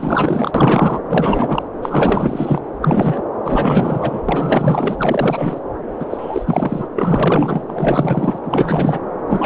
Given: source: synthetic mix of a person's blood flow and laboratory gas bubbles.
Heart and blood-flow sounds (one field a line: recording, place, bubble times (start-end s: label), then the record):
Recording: Doppler ultrasound of blood flow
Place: subclavian vein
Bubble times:
0.00-0.51 s: bubbles
0.54-1.00 s: bubbles
1.09-1.62 s: bubbles
1.82-2.62 s: bubbles
2.81-3.23 s: bubbles
3.44-5.61 s: bubbles
5.99-6.06 s: bubbles
6.09-6.89 s: bubbles
6.94-7.61 s: bubbles
7.67-8.38 s: bubbles
8.44-9.01 s: bubbles
9.27-9.46 s: bubbles
From the record:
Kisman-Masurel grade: 444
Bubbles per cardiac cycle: continuous sound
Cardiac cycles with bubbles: 100%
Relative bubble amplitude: maximal (0.775 to 0.999)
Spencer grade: 4 (maximum detectable bubble signal sounding continuously throughout systole and diastole of every cardiac period, and overriding the amplitude of the normal cardiac signals)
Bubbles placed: anywhere in the cardiac cycle